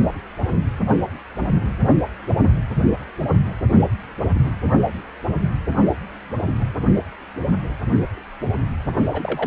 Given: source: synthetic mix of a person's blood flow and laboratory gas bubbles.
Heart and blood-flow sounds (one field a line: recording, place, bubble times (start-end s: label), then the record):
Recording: Doppler ultrasound of blood flow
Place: precordium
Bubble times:
9.12-9.46 s: bubbles
From the record:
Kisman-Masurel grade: 221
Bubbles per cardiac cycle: several, 3 to 8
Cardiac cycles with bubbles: 10 to 50%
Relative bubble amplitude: barely perceptible (0.100 to 0.250)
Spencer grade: 2 (many but less than half of the cardiac periods contain bubble signals, singularly or in groups)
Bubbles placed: only in the low amplitude regions of the cardiac cycle